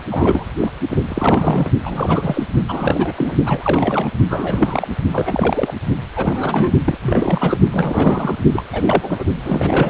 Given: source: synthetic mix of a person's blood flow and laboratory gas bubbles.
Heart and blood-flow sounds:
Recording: Doppler ultrasound of blood flow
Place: precordium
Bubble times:
0.00-0.04 s: bubbles
0.11-0.53 s: bubbles
0.60-0.71 s: bubbles
0.90-0.99 s: bubbles
1.08-1.71 s: bubbles
1.84-2.44 s: bubbles
2.68-3.37 s: bubbles
3.46-4.11 s: bubbles
4.28-4.88 s: bubbles
5.12-5.73 s: bubbles
6.16-6.72 s: bubbles
6.84-6.98 s: bubbles
7.02-7.58 s: bubbles
7.72-8.35 s: bubbles
8.53-8.63 s: bubbles
8.72-9.24 s: bubbles
9.44-9.90 s: bubbles
From the record:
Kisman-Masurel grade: 342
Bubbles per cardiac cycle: rolling drumbeat, 9 or more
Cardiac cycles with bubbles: 100%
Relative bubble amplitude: moderate (0.250 to 0.450)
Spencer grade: 3 (all of the cardiac periods contain showers or single bubble signals, but not dominating or overriding the cardiac motion signals)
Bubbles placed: only in the low amplitude regions of the cardiac cycle

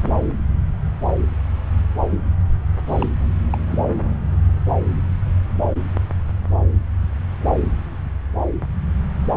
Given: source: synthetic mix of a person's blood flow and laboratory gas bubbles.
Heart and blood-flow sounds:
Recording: Doppler ultrasound of blood flow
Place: subclavian vein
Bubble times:
2.87-3.09 s: bubbles
3.50-3.58 s: bubbles
3.71-3.79 s: bubbles
From the record:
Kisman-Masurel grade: 111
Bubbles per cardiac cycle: 1 to 2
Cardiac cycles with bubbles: 1 to 10%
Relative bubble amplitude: barely perceptible (0.100 to 0.250)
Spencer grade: 1 (occasional bubble signal discernible with the cardiac motion signal, with majority of cardiac periods free of bubbles)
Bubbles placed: anywhere in the cardiac cycle

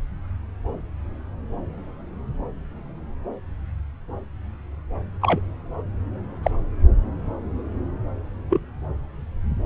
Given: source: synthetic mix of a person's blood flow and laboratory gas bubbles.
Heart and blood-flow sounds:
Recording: Doppler ultrasound of blood flow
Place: subclavian vein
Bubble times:
5.21-5.40 s: bubbles
6.42-6.50 s: bubbles
8.49-8.61 s: bubbles
From the record:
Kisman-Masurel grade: 122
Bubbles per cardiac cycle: 1 to 2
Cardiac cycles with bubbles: 10 to 50%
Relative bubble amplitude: moderate (0.250 to 0.450)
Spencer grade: 2 (many but less than half of the cardiac periods contain bubble signals, singularly or in groups)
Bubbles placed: anywhere in the cardiac cycle

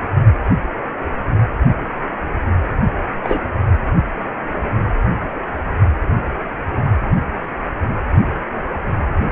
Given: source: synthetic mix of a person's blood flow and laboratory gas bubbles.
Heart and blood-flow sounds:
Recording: Doppler ultrasound of blood flow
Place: precordium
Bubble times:
3.20-3.42 s: bubbles
From the record:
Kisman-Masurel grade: 122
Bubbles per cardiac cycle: 1 to 2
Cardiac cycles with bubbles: 10 to 50%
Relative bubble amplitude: moderate (0.250 to 0.450)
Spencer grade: 2 (many but less than half of the cardiac periods contain bubble signals, singularly or in groups)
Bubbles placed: only in the low amplitude regions of the cardiac cycle

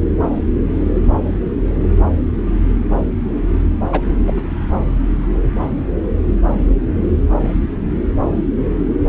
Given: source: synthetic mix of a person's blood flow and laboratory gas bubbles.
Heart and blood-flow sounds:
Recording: Doppler ultrasound of blood flow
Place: subclavian vein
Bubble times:
3.92-4.00 s: bubbles
4.26-4.41 s: bubbles
From the record:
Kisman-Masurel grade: 213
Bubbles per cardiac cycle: several, 3 to 8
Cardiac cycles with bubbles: 1 to 10%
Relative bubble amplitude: loud (0.450 to 0.775)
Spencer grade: 1 (occasional bubble signal discernible with the cardiac motion signal, with majority of cardiac periods free of bubbles)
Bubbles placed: anywhere in the cardiac cycle

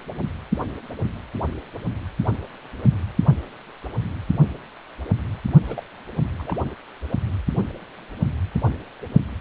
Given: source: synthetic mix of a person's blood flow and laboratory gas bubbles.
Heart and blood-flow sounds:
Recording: Doppler ultrasound of blood flow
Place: precordium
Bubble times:
5.67-5.83 s: bubbles
6.38-6.56 s: bubbles
From the record:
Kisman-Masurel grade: 211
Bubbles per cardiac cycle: several, 3 to 8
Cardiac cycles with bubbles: 1 to 10%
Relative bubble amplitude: barely perceptible (0.100 to 0.250)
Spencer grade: 1 (occasional bubble signal discernible with the cardiac motion signal, with majority of cardiac periods free of bubbles)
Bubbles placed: only in the low amplitude regions of the cardiac cycle

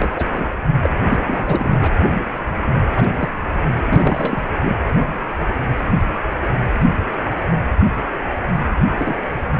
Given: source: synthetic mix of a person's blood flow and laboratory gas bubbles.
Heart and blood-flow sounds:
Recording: Doppler ultrasound of blood flow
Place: precordium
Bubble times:
0.00-0.27 s: bubbles
0.33-0.47 s: bubbles
0.83-0.90 s: bubbles
1.08-1.19 s: bubbles
1.22-1.91 s: bubbles
2.90-3.30 s: bubbles
3.90-4.42 s: bubbles
4.61-4.76 s: bubbles
8.98-9.16 s: bubbles
From the record:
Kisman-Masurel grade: 222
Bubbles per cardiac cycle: several, 3 to 8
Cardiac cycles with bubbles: 10 to 50%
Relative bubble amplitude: moderate (0.250 to 0.450)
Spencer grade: 2 (many but less than half of the cardiac periods contain bubble signals, singularly or in groups)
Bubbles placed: anywhere in the cardiac cycle

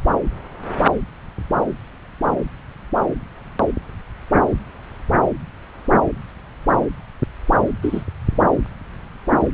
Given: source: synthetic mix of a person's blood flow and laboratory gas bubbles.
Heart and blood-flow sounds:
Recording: Doppler ultrasound of blood flow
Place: subclavian vein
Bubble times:
7.82-8.05 s: bubbles
From the record:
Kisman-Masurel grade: 113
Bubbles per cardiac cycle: 1 to 2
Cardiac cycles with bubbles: 1 to 10%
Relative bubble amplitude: loud (0.450 to 0.775)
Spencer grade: 1 (occasional bubble signal discernible with the cardiac motion signal, with majority of cardiac periods free of bubbles)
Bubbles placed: anywhere in the cardiac cycle

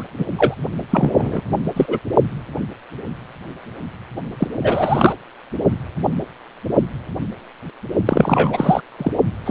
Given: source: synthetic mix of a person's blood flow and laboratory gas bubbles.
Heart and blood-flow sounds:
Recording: Doppler ultrasound of blood flow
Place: precordium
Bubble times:
0.00-0.03 s: bubbles
0.18-0.26 s: bubbles
0.36-0.55 s: bubbles
0.90-1.43 s: bubbles
1.76-1.99 s: bubbles
4.38-4.48 s: bubbles
4.62-5.12 s: bubbles
8.05-8.81 s: bubbles
8.97-9.12 s: bubbles
9.45-9.51 s: bubbles
From the record:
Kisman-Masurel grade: 233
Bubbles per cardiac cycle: several, 3 to 8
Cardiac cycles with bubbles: 50 to 99%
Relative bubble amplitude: loud (0.450 to 0.775)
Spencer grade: 3 (all of the cardiac periods contain showers or single bubble signals, but not dominating or overriding the cardiac motion signals)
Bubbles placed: only in the low amplitude regions of the cardiac cycle

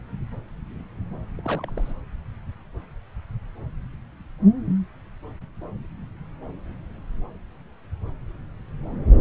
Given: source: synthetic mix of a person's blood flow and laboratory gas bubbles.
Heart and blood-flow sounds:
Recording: Doppler ultrasound of blood flow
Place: subclavian vein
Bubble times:
1.38-1.93 s: bubbles
From the record:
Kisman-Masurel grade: 211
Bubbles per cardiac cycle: several, 3 to 8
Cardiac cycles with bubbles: 1 to 10%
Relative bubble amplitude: barely perceptible (0.100 to 0.250)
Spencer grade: 1 (occasional bubble signal discernible with the cardiac motion signal, with majority of cardiac periods free of bubbles)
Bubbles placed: anywhere in the cardiac cycle

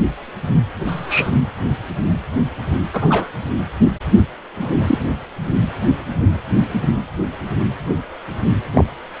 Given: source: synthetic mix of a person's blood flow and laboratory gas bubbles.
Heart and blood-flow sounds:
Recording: Doppler ultrasound of blood flow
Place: precordium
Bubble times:
0.86-1.31 s: bubbles
2.93-3.26 s: bubbles
4.60-4.70 s: bubbles
4.83-4.98 s: bubbles
8.71-8.84 s: bubbles
From the record:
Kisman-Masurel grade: 123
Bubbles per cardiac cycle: 1 to 2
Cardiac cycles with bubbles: 10 to 50%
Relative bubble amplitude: loud (0.450 to 0.775)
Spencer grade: 2 (many but less than half of the cardiac periods contain bubble signals, singularly or in groups)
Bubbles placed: anywhere in the cardiac cycle

